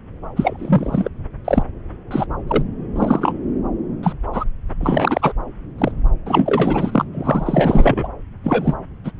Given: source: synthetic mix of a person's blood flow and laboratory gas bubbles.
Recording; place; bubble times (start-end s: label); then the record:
Doppler ultrasound of blood flow; subclavian vein
0.36-1.09 s: bubbles
1.45-1.63 s: bubbles
2.10-2.26 s: bubbles
2.47-2.62 s: bubbles
2.96-3.32 s: bubbles
4.03-4.13 s: bubbles
4.33-4.45 s: bubbles
4.80-5.33 s: bubbles
5.78-5.92 s: bubbles
6.25-7.04 s: bubbles
7.12-8.08 s: bubbles
8.44-8.74 s: bubbles
9.04-9.11 s: bubbles
From the record:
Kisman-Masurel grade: 243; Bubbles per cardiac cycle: several, 3 to 8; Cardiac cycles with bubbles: 100%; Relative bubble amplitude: loud (0.450 to 0.775); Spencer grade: 3 (all of the cardiac periods contain showers or single bubble signals, but not dominating or overriding the cardiac motion signals); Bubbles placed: anywhere in the cardiac cycle